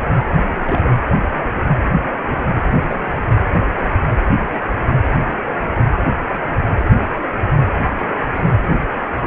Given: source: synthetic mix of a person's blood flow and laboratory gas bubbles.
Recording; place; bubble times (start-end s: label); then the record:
Doppler ultrasound of blood flow; precordium
0.64-0.82 s: bubbles
2.88-3.25 s: bubbles
8.37-8.50 s: bubbles
From the record:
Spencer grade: 2 (many but less than half of the cardiac periods contain bubble signals, singularly or in groups); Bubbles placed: anywhere in the cardiac cycle